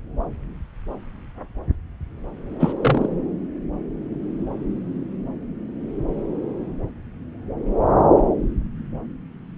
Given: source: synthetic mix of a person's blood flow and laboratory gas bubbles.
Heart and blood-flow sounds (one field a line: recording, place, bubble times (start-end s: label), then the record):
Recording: Doppler ultrasound of blood flow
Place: subclavian vein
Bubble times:
2.59-2.72 s: bubbles
2.82-3.07 s: bubbles
From the record:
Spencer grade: 1 (occasional bubble signal discernible with the cardiac motion signal, with majority of cardiac periods free of bubbles)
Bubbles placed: anywhere in the cardiac cycle